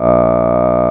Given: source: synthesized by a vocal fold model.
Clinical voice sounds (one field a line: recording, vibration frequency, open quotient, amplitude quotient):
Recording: sustained vowel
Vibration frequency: 60 Hz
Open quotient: 0.2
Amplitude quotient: 1.1